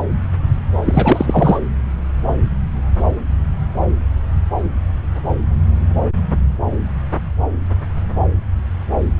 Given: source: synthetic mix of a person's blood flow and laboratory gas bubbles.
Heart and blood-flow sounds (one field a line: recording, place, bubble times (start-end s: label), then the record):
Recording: Doppler ultrasound of blood flow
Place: subclavian vein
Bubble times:
0.85-1.60 s: bubbles
From the record:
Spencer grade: 1 (occasional bubble signal discernible with the cardiac motion signal, with majority of cardiac periods free of bubbles)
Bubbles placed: anywhere in the cardiac cycle